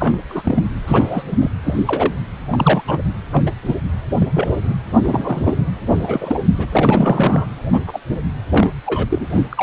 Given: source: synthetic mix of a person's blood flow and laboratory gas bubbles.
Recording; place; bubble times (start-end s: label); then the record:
Doppler ultrasound of blood flow; precordium
0.00-0.19 s: bubbles
0.29-0.65 s: bubbles
0.86-1.23 s: bubbles
1.31-1.38 s: bubbles
1.41-1.50 s: bubbles
1.64-1.83 s: bubbles
1.86-2.14 s: bubbles
2.52-2.82 s: bubbles
2.88-2.99 s: bubbles
3.32-3.43 s: bubbles
3.46-3.51 s: bubbles
3.62-3.75 s: bubbles
4.20-4.28 s: bubbles
4.34-4.48 s: bubbles
4.63-4.74 s: bubbles
5.03-5.54 s: bubbles
5.94-6.40 s: bubbles
6.58-6.66 s: bubbles
6.72-7.46 s: bubbles
7.73-7.81 s: bubbles
7.87-8.00 s: bubbles
8.51-8.70 s: bubbles
8.86-9.05 s: bubbles
9.10-9.26 s: bubbles
9.32-9.42 s: bubbles
9.50-9.63 s: bubbles
From the record:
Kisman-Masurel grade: 242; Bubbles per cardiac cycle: several, 3 to 8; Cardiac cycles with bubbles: 100%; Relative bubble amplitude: moderate (0.250 to 0.450); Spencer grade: 3 (all of the cardiac periods contain showers or single bubble signals, but not dominating or overriding the cardiac motion signals); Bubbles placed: anywhere in the cardiac cycle